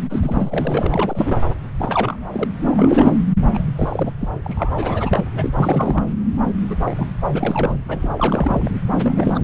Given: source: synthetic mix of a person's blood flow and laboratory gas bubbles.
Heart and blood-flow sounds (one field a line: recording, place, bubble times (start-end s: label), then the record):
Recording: Doppler ultrasound of blood flow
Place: subclavian vein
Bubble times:
0.09-0.87 s: bubbles
0.90-1.38 s: bubbles
1.79-2.17 s: bubbles
2.32-2.47 s: bubbles
2.64-3.24 s: bubbles
3.49-3.67 s: bubbles
3.75-4.14 s: bubbles
4.19-4.29 s: bubbles
4.46-5.25 s: bubbles
5.33-5.50 s: bubbles
5.56-6.04 s: bubbles
6.70-7.06 s: bubbles
7.33-7.77 s: bubbles
7.88-8.71 s: bubbles
8.98-9.39 s: bubbles
From the record:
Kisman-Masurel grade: 342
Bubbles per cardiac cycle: rolling drumbeat, 9 or more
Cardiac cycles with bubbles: 100%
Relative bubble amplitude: moderate (0.250 to 0.450)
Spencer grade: 3 (all of the cardiac periods contain showers or single bubble signals, but not dominating or overriding the cardiac motion signals)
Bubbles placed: anywhere in the cardiac cycle